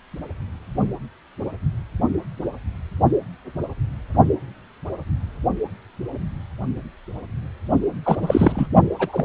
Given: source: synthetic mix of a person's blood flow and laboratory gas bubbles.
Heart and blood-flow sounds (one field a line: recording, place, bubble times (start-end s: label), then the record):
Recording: Doppler ultrasound of blood flow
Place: precordium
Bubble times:
8.05-8.18 s: bubbles
8.21-8.67 s: bubbles
8.98-9.25 s: bubbles
From the record:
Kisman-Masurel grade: 223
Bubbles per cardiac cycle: several, 3 to 8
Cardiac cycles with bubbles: 10 to 50%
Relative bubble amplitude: loud (0.450 to 0.775)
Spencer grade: 2 (many but less than half of the cardiac periods contain bubble signals, singularly or in groups)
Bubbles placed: only in the low amplitude regions of the cardiac cycle